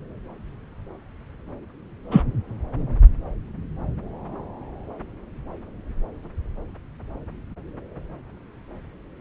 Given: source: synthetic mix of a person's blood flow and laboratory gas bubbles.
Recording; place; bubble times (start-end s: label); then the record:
Doppler ultrasound of blood flow; subclavian vein
2.10-2.23 s: bubbles
From the record:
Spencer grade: 1 (occasional bubble signal discernible with the cardiac motion signal, with majority of cardiac periods free of bubbles); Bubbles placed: anywhere in the cardiac cycle